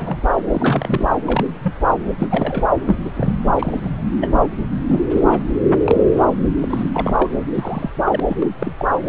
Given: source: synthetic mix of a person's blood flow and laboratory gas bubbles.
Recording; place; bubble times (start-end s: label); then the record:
Doppler ultrasound of blood flow; subclavian vein
0.00-0.17 s: bubbles
0.51-1.08 s: bubbles
1.26-1.47 s: bubbles
1.63-1.73 s: bubbles
2.19-2.63 s: bubbles
2.87-2.96 s: bubbles
3.04-3.11 s: bubbles
3.13-3.34 s: bubbles
3.56-3.90 s: bubbles
4.21-4.29 s: bubbles
4.88-5.03 s: bubbles
5.12-5.46 s: bubbles
5.83-6.21 s: bubbles
6.62-6.90 s: bubbles
6.94-7.14 s: bubbles
7.19-7.29 s: bubbles
7.54-7.90 s: bubbles
8.04-8.20 s: bubbles
8.25-8.47 s: bubbles
8.60-8.72 s: bubbles
8.79-8.85 s: bubbles
9.06-9.09 s: bubbles
From the record:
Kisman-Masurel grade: 242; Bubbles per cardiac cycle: several, 3 to 8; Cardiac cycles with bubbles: 100%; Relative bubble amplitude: moderate (0.250 to 0.450); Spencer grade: 3 (all of the cardiac periods contain showers or single bubble signals, but not dominating or overriding the cardiac motion signals); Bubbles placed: anywhere in the cardiac cycle